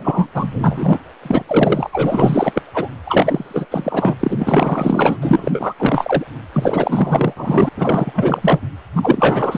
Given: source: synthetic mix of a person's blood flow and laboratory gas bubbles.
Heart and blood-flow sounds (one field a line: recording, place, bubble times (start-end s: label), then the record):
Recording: Doppler ultrasound of blood flow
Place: precordium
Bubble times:
0.00-0.31 s: bubbles
0.34-0.99 s: bubbles
1.22-1.43 s: bubbles
1.48-1.90 s: bubbles
1.93-2.62 s: bubbles
2.74-2.88 s: bubbles
3.05-3.66 s: bubbles
3.71-4.13 s: bubbles
4.19-5.18 s: bubbles
5.21-5.75 s: bubbles
5.78-6.25 s: bubbles
6.52-7.33 s: bubbles
7.36-7.69 s: bubbles
7.77-8.68 s: bubbles
8.96-9.58 s: bubbles
From the record:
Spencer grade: 4 (maximum detectable bubble signal sounding continuously throughout systole and diastole of every cardiac period, and overriding the amplitude of the normal cardiac signals)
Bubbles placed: anywhere in the cardiac cycle